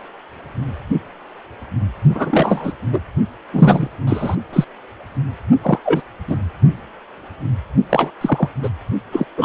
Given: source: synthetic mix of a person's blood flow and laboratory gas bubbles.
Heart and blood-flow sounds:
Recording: Doppler ultrasound of blood flow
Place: precordium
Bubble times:
2.15-2.73 s: bubbles
2.92-3.00 s: bubbles
3.53-3.88 s: bubbles
4.07-4.35 s: bubbles
4.53-4.65 s: bubbles
5.62-5.79 s: bubbles
5.85-6.02 s: bubbles
6.28-6.38 s: bubbles
7.90-8.11 s: bubbles
8.21-8.48 s: bubbles
8.62-8.69 s: bubbles
9.12-9.26 s: bubbles
9.37-9.45 s: bubbles
From the record:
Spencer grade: 3 (all of the cardiac periods contain showers or single bubble signals, but not dominating or overriding the cardiac motion signals)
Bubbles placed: only in the low amplitude regions of the cardiac cycle

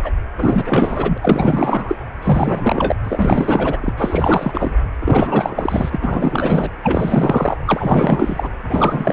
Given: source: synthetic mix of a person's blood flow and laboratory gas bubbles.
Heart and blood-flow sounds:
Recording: Doppler ultrasound of blood flow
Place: precordium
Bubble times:
0.02-0.11 s: bubbles
0.37-1.18 s: bubbles
1.21-1.96 s: bubbles
2.22-2.95 s: bubbles
3.04-3.93 s: bubbles
3.97-4.76 s: bubbles
5.00-5.90 s: bubbles
5.92-6.69 s: bubbles
6.83-7.57 s: bubbles
7.65-8.50 s: bubbles
8.67-9.13 s: bubbles
From the record:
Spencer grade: 4 (maximum detectable bubble signal sounding continuously throughout systole and diastole of every cardiac period, and overriding the amplitude of the normal cardiac signals)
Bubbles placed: anywhere in the cardiac cycle

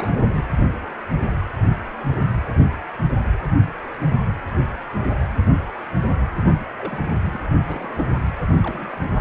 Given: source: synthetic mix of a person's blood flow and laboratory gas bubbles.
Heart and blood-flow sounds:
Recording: Doppler ultrasound of blood flow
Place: precordium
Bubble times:
0.00-0.46 s: bubbles
6.46-6.61 s: bubbles
6.76-7.00 s: bubbles
7.06-7.10 s: bubbles
7.33-7.41 s: bubbles
7.64-8.05 s: bubbles
8.48-9.16 s: bubbles
From the record:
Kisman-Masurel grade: 221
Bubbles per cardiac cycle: several, 3 to 8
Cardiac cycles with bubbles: 10 to 50%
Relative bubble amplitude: barely perceptible (0.100 to 0.250)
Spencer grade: 2 (many but less than half of the cardiac periods contain bubble signals, singularly or in groups)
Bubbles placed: anywhere in the cardiac cycle

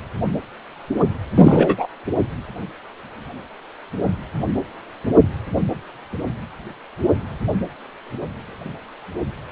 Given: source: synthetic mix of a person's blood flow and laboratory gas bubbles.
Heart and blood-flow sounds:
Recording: Doppler ultrasound of blood flow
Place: precordium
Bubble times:
1.35-1.87 s: bubbles
From the record:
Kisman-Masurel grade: 213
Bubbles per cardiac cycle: several, 3 to 8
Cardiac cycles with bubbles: 1 to 10%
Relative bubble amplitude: loud (0.450 to 0.775)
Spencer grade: 1 (occasional bubble signal discernible with the cardiac motion signal, with majority of cardiac periods free of bubbles)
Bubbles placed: anywhere in the cardiac cycle

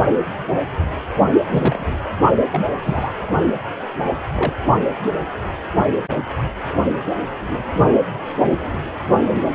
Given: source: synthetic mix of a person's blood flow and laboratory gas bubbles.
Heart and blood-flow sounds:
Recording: Doppler ultrasound of blood flow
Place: precordium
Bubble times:
1.50-1.97 s: bubbles
2.51-2.65 s: bubbles
2.79-3.12 s: bubbles
4.03-4.12 s: bubbles
4.35-4.53 s: bubbles
From the record:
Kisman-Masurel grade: 122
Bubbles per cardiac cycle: 1 to 2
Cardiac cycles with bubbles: 10 to 50%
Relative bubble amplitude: moderate (0.250 to 0.450)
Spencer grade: 2 (many but less than half of the cardiac periods contain bubble signals, singularly or in groups)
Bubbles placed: only in the low amplitude regions of the cardiac cycle

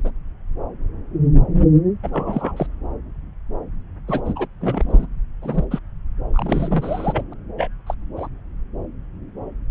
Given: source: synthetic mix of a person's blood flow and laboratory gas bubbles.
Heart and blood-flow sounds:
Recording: Doppler ultrasound of blood flow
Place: subclavian vein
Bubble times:
0.05-0.11 s: bubbles
2.02-2.67 s: bubbles
4.08-4.21 s: bubbles
4.25-4.46 s: bubbles
4.60-5.06 s: bubbles
5.42-5.65 s: bubbles
5.71-5.79 s: bubbles
6.34-7.23 s: bubbles
7.31-7.33 s: bubbles
7.57-7.68 s: bubbles
7.86-7.94 s: bubbles
8.16-8.27 s: bubbles
From the record:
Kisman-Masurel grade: 232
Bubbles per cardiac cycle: several, 3 to 8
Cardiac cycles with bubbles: 50 to 99%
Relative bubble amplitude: moderate (0.250 to 0.450)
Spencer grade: 3 (all of the cardiac periods contain showers or single bubble signals, but not dominating or overriding the cardiac motion signals)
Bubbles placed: anywhere in the cardiac cycle

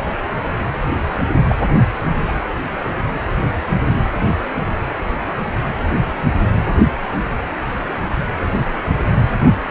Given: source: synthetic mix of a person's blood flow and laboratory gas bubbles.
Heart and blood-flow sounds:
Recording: Doppler ultrasound of blood flow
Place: precordium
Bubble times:
1.49-1.56 s: bubbles
2.27-2.32 s: bubbles
From the record:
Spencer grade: 2 (many but less than half of the cardiac periods contain bubble signals, singularly or in groups)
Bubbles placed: anywhere in the cardiac cycle

